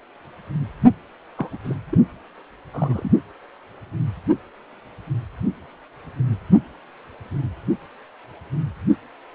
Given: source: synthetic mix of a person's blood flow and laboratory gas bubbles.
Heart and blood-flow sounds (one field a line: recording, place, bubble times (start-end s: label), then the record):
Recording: Doppler ultrasound of blood flow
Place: precordium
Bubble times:
1.37-1.58 s: bubbles
1.64-1.75 s: bubbles
1.90-1.98 s: bubbles
2.73-3.12 s: bubbles
From the record:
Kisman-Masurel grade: 221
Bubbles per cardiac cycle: several, 3 to 8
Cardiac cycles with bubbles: 10 to 50%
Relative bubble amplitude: barely perceptible (0.100 to 0.250)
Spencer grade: 2 (many but less than half of the cardiac periods contain bubble signals, singularly or in groups)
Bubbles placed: only in the low amplitude regions of the cardiac cycle